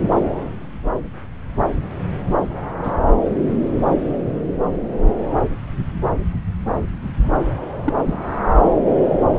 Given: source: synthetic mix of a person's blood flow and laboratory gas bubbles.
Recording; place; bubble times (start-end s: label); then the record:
Doppler ultrasound of blood flow; subclavian vein
2.83-2.98 s: bubbles
7.84-7.93 s: bubbles
8.05-8.19 s: bubbles
From the record:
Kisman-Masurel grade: 122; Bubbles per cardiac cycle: 1 to 2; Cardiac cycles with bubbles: 10 to 50%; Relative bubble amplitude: moderate (0.250 to 0.450); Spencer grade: 2 (many but less than half of the cardiac periods contain bubble signals, singularly or in groups); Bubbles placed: anywhere in the cardiac cycle